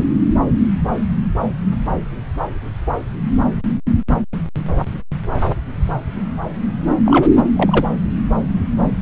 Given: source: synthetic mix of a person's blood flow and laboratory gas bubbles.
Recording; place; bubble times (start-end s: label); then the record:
Doppler ultrasound of blood flow; subclavian vein
7.05-7.26 s: bubbles
7.56-7.85 s: bubbles
From the record:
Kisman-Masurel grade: 123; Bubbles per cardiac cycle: 1 to 2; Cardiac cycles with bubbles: 10 to 50%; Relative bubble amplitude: loud (0.450 to 0.775); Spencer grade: 2 (many but less than half of the cardiac periods contain bubble signals, singularly or in groups); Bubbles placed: anywhere in the cardiac cycle